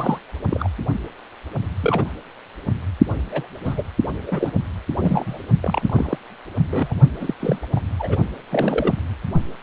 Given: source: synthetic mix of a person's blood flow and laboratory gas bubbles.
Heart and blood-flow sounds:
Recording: Doppler ultrasound of blood flow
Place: precordium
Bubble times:
0.00-0.19 s: bubbles
0.51-0.69 s: bubbles
1.82-2.11 s: bubbles
3.30-3.47 s: bubbles
3.65-3.83 s: bubbles
4.26-4.51 s: bubbles
5.00-5.39 s: bubbles
5.62-6.19 s: bubbles
6.56-6.95 s: bubbles
7.20-7.34 s: bubbles
7.40-7.58 s: bubbles
7.75-7.81 s: bubbles
7.99-8.17 s: bubbles
8.50-8.94 s: bubbles
From the record:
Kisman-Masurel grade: 242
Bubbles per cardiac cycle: several, 3 to 8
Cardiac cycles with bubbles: 100%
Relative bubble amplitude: moderate (0.250 to 0.450)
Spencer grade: 3 (all of the cardiac periods contain showers or single bubble signals, but not dominating or overriding the cardiac motion signals)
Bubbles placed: only in the low amplitude regions of the cardiac cycle

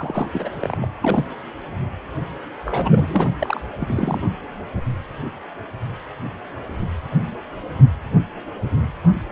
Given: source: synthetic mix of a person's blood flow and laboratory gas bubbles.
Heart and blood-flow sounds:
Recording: Doppler ultrasound of blood flow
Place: precordium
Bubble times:
0.00-0.28 s: bubbles
0.32-0.49 s: bubbles
0.59-0.78 s: bubbles
0.81-0.88 s: bubbles
0.93-1.25 s: bubbles
2.65-3.30 s: bubbles
3.39-3.61 s: bubbles
3.79-4.21 s: bubbles
From the record:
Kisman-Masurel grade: 222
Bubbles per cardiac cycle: several, 3 to 8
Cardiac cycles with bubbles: 10 to 50%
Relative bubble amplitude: moderate (0.250 to 0.450)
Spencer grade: 2 (many but less than half of the cardiac periods contain bubble signals, singularly or in groups)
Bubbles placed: anywhere in the cardiac cycle

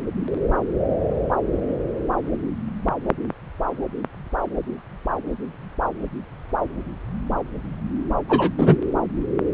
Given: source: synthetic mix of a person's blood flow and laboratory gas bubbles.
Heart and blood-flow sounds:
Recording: Doppler ultrasound of blood flow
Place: subclavian vein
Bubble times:
8.29-8.51 s: bubbles
8.57-8.77 s: bubbles
From the record:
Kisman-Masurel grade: 213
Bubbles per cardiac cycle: several, 3 to 8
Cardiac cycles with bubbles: 1 to 10%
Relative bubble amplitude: loud (0.450 to 0.775)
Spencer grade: 1 (occasional bubble signal discernible with the cardiac motion signal, with majority of cardiac periods free of bubbles)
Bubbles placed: anywhere in the cardiac cycle

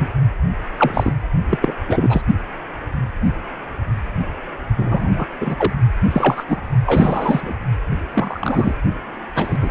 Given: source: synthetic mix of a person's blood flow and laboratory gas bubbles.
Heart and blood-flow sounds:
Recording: Doppler ultrasound of blood flow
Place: precordium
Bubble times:
0.00-0.08 s: bubbles
0.77-1.16 s: bubbles
1.49-1.58 s: bubbles
1.61-1.73 s: bubbles
1.87-2.22 s: bubbles
4.76-5.27 s: bubbles
5.40-5.73 s: bubbles
6.09-6.44 s: bubbles
6.48-6.61 s: bubbles
6.86-7.54 s: bubbles
8.11-8.74 s: bubbles
9.35-9.58 s: bubbles
9.62-9.71 s: bubbles
From the record:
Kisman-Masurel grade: 233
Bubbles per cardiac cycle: several, 3 to 8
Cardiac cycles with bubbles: 50 to 99%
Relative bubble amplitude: loud (0.450 to 0.775)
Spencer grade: 3 (all of the cardiac periods contain showers or single bubble signals, but not dominating or overriding the cardiac motion signals)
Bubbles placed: only in the low amplitude regions of the cardiac cycle

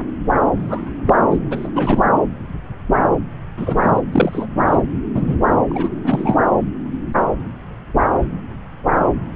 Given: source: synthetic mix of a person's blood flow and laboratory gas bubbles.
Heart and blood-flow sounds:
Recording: Doppler ultrasound of blood flow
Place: subclavian vein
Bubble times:
0.59-0.95 s: bubbles
1.06-1.14 s: bubbles
1.30-1.40 s: bubbles
1.51-1.70 s: bubbles
1.75-2.00 s: bubbles
3.57-3.91 s: bubbles
3.95-4.00 s: bubbles
4.12-4.46 s: bubbles
4.67-4.82 s: bubbles
5.15-5.36 s: bubbles
5.70-5.99 s: bubbles
6.04-6.36 s: bubbles
From the record:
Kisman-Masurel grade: 223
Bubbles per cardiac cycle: several, 3 to 8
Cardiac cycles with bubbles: 10 to 50%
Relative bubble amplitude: loud (0.450 to 0.775)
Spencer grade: 2 (many but less than half of the cardiac periods contain bubble signals, singularly or in groups)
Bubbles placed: anywhere in the cardiac cycle

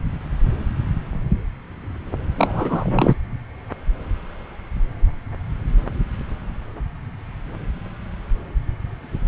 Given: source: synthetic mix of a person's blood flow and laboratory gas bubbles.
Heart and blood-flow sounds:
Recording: Doppler ultrasound of blood flow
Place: subclavian vein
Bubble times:
2.38-3.16 s: bubbles
From the record:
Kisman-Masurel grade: 212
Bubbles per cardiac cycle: several, 3 to 8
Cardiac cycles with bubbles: 1 to 10%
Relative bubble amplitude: moderate (0.250 to 0.450)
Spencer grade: 1 (occasional bubble signal discernible with the cardiac motion signal, with majority of cardiac periods free of bubbles)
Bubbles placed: anywhere in the cardiac cycle

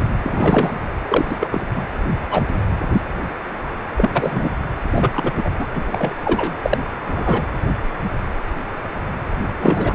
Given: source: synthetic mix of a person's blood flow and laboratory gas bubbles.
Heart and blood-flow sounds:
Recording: Doppler ultrasound of blood flow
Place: precordium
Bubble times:
0.23-0.80 s: bubbles
1.08-1.47 s: bubbles
1.51-1.66 s: bubbles
1.74-1.82 s: bubbles
2.31-2.42 s: bubbles
3.96-4.54 s: bubbles
4.92-5.33 s: bubbles
5.37-5.50 s: bubbles
5.59-5.66 s: bubbles
5.75-5.84 s: bubbles
5.92-6.14 s: bubbles
6.24-6.54 s: bubbles
6.63-6.78 s: bubbles
7.03-7.42 s: bubbles
9.59-9.95 s: bubbles
From the record:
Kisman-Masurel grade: 233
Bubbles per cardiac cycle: several, 3 to 8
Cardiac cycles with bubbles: 50 to 99%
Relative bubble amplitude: loud (0.450 to 0.775)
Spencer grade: 3 (all of the cardiac periods contain showers or single bubble signals, but not dominating or overriding the cardiac motion signals)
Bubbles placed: anywhere in the cardiac cycle

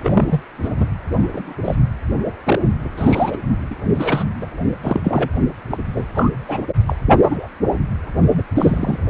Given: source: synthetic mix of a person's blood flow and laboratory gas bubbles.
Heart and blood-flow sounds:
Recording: Doppler ultrasound of blood flow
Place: precordium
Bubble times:
0.02-0.41 s: bubbles
0.62-0.69 s: bubbles
0.80-0.86 s: bubbles
1.12-1.28 s: bubbles
1.33-1.53 s: bubbles
1.64-1.75 s: bubbles
2.44-2.59 s: bubbles
2.97-3.38 s: bubbles
3.70-3.75 s: bubbles
3.95-4.24 s: bubbles
4.41-4.46 s: bubbles
4.82-5.00 s: bubbles
5.04-5.29 s: bubbles
5.70-5.78 s: bubbles
5.95-6.05 s: bubbles
6.14-6.30 s: bubbles
6.48-6.62 s: bubbles
6.85-6.96 s: bubbles
7.21-7.48 s: bubbles
8.31-8.43 s: bubbles
8.55-8.99 s: bubbles
From the record:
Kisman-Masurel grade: 242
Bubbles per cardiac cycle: several, 3 to 8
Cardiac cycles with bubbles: 100%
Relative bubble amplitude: moderate (0.250 to 0.450)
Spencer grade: 3 (all of the cardiac periods contain showers or single bubble signals, but not dominating or overriding the cardiac motion signals)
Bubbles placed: anywhere in the cardiac cycle

